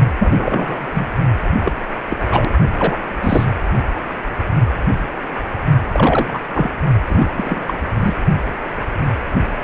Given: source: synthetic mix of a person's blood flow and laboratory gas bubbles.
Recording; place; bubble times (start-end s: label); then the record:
Doppler ultrasound of blood flow; precordium
0.19-1.09 s: bubbles
1.60-1.73 s: bubbles
2.10-2.17 s: bubbles
2.31-2.50 s: bubbles
2.72-2.98 s: bubbles
3.20-3.45 s: bubbles
5.92-6.41 s: bubbles
6.53-6.69 s: bubbles
7.08-7.78 s: bubbles
8.00-8.14 s: bubbles
From the record:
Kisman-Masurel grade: 233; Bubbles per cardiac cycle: several, 3 to 8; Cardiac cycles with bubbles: 50 to 99%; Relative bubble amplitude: loud (0.450 to 0.775); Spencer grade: 3 (all of the cardiac periods contain showers or single bubble signals, but not dominating or overriding the cardiac motion signals); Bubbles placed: only in the low amplitude regions of the cardiac cycle